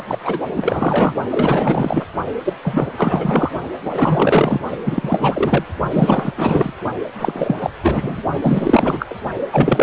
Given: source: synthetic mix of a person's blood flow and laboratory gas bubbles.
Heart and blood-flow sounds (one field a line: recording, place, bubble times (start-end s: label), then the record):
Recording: Doppler ultrasound of blood flow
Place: precordium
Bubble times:
0.07-0.17 s: bubbles
0.23-0.40 s: bubbles
0.55-1.14 s: bubbles
1.31-2.06 s: bubbles
2.44-2.54 s: bubbles
2.63-2.90 s: bubbles
2.97-3.52 s: bubbles
3.85-4.60 s: bubbles
4.84-5.64 s: bubbles
5.91-6.32 s: bubbles
6.37-6.72 s: bubbles
7.17-7.71 s: bubbles
7.82-8.22 s: bubbles
8.42-9.06 s: bubbles
9.11-9.15 s: bubbles
9.51-9.83 s: bubbles
From the record:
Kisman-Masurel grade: 444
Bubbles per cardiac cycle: continuous sound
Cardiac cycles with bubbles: 100%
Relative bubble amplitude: maximal (0.775 to 0.999)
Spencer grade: 4 (maximum detectable bubble signal sounding continuously throughout systole and diastole of every cardiac period, and overriding the amplitude of the normal cardiac signals)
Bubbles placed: only in the low amplitude regions of the cardiac cycle